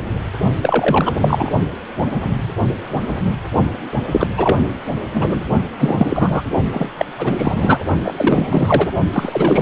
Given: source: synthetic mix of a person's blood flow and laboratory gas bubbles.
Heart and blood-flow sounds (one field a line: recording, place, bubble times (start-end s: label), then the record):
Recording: Doppler ultrasound of blood flow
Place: precordium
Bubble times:
0.61-1.14 s: bubbles
1.20-1.52 s: bubbles
4.11-4.27 s: bubbles
4.37-4.57 s: bubbles
5.13-5.42 s: bubbles
5.79-6.42 s: bubbles
6.72-6.88 s: bubbles
6.97-7.05 s: bubbles
7.18-7.78 s: bubbles
8.03-8.88 s: bubbles
9.12-9.62 s: bubbles
From the record:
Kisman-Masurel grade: 333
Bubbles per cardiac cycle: rolling drumbeat, 9 or more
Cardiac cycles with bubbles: 50 to 99%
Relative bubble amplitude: loud (0.450 to 0.775)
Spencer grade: 3 (all of the cardiac periods contain showers or single bubble signals, but not dominating or overriding the cardiac motion signals)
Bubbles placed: only in the low amplitude regions of the cardiac cycle